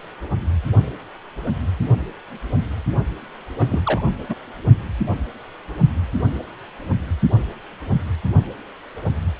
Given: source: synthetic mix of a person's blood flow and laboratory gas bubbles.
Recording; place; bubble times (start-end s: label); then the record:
Doppler ultrasound of blood flow; precordium
3.58-3.81 s: bubbles
3.84-4.02 s: bubbles
4.05-4.12 s: bubbles
4.29-4.36 s: bubbles
From the record:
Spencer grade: 2 (many but less than half of the cardiac periods contain bubble signals, singularly or in groups); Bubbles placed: only in the low amplitude regions of the cardiac cycle